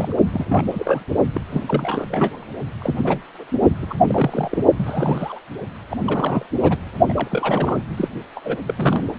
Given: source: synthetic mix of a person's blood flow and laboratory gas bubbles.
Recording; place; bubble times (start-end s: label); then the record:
Doppler ultrasound of blood flow; precordium
0.00-0.14 s: bubbles
0.32-0.45 s: bubbles
0.48-0.64 s: bubbles
0.71-1.04 s: bubbles
1.34-1.41 s: bubbles
1.50-1.64 s: bubbles
1.67-2.45 s: bubbles
2.81-2.94 s: bubbles
2.97-3.20 s: bubbles
3.38-3.44 s: bubbles
3.82-3.86 s: bubbles
3.89-3.94 s: bubbles
3.99-4.63 s: bubbles
4.77-5.39 s: bubbles
5.90-5.96 s: bubbles
6.05-6.46 s: bubbles
6.63-6.78 s: bubbles
7.08-7.13 s: bubbles
7.16-7.28 s: bubbles
7.30-7.79 s: bubbles
7.96-8.09 s: bubbles
8.36-8.40 s: bubbles
8.43-8.57 s: bubbles
8.67-9.04 s: bubbles
From the record:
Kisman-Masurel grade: 342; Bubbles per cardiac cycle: rolling drumbeat, 9 or more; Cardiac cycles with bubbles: 100%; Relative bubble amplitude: moderate (0.250 to 0.450); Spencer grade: 3 (all of the cardiac periods contain showers or single bubble signals, but not dominating or overriding the cardiac motion signals); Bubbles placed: only in the low amplitude regions of the cardiac cycle